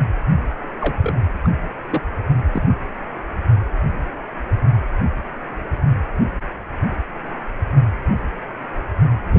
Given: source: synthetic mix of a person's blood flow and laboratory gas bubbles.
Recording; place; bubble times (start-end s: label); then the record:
Doppler ultrasound of blood flow; precordium
0.78-1.13 s: bubbles
1.44-1.51 s: bubbles
1.90-2.02 s: bubbles
2.54-2.62 s: bubbles
From the record:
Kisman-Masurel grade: 212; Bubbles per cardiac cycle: several, 3 to 8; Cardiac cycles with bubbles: 1 to 10%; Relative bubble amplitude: moderate (0.250 to 0.450); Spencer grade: 1 (occasional bubble signal discernible with the cardiac motion signal, with majority of cardiac periods free of bubbles); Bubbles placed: anywhere in the cardiac cycle